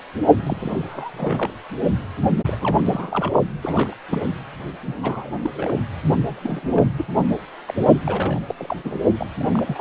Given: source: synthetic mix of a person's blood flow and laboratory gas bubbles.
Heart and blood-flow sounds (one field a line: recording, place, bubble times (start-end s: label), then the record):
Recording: Doppler ultrasound of blood flow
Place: precordium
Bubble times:
0.43-1.50 s: bubbles
2.46-2.56 s: bubbles
2.60-3.31 s: bubbles
3.62-3.96 s: bubbles
4.11-4.28 s: bubbles
4.86-4.95 s: bubbles
5.01-5.39 s: bubbles
5.42-5.50 s: bubbles
5.54-5.73 s: bubbles
6.27-6.84 s: bubbles
6.97-7.05 s: bubbles
7.15-7.27 s: bubbles
7.66-7.74 s: bubbles
8.03-8.40 s: bubbles
8.48-8.54 s: bubbles
8.57-8.77 s: bubbles
8.84-9.00 s: bubbles
9.17-9.27 s: bubbles
9.40-9.63 s: bubbles
9.67-9.81 s: bubbles
From the record:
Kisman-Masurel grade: 332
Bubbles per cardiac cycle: rolling drumbeat, 9 or more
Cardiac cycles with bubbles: 50 to 99%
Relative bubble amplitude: moderate (0.250 to 0.450)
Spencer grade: 3 (all of the cardiac periods contain showers or single bubble signals, but not dominating or overriding the cardiac motion signals)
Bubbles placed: only in the low amplitude regions of the cardiac cycle